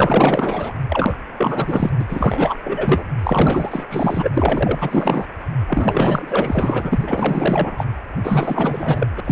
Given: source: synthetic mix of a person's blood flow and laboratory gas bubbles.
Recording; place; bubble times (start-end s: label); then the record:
Doppler ultrasound of blood flow; precordium
0.00-0.72 s: bubbles
0.89-1.17 s: bubbles
1.38-1.91 s: bubbles
1.99-2.05 s: bubbles
2.08-2.56 s: bubbles
2.64-3.04 s: bubbles
3.23-3.86 s: bubbles
3.90-4.29 s: bubbles
4.34-5.27 s: bubbles
5.67-7.84 s: bubbles
8.24-9.08 s: bubbles
9.10-9.21 s: bubbles
9.25-9.32 s: bubbles
From the record:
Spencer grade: 4 (maximum detectable bubble signal sounding continuously throughout systole and diastole of every cardiac period, and overriding the amplitude of the normal cardiac signals); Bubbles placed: anywhere in the cardiac cycle